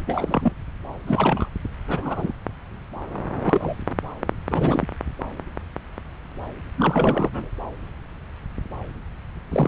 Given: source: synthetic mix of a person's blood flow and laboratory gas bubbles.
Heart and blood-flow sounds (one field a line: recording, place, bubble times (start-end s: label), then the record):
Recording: Doppler ultrasound of blood flow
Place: subclavian vein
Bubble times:
0.07-0.52 s: bubbles
1.06-1.49 s: bubbles
1.88-2.32 s: bubbles
3.42-3.76 s: bubbles
4.51-4.87 s: bubbles
6.77-7.50 s: bubbles
9.49-9.68 s: bubbles
From the record:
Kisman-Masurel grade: 222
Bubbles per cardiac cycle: several, 3 to 8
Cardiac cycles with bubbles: 10 to 50%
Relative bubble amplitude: moderate (0.250 to 0.450)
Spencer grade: 2 (many but less than half of the cardiac periods contain bubble signals, singularly or in groups)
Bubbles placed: anywhere in the cardiac cycle